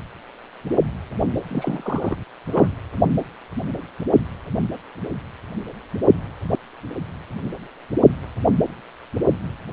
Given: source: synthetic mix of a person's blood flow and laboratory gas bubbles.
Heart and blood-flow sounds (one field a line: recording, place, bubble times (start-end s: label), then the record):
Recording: Doppler ultrasound of blood flow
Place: precordium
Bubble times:
1.47-2.17 s: bubbles
2.51-2.67 s: bubbles
From the record:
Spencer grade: 1 (occasional bubble signal discernible with the cardiac motion signal, with majority of cardiac periods free of bubbles)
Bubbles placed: anywhere in the cardiac cycle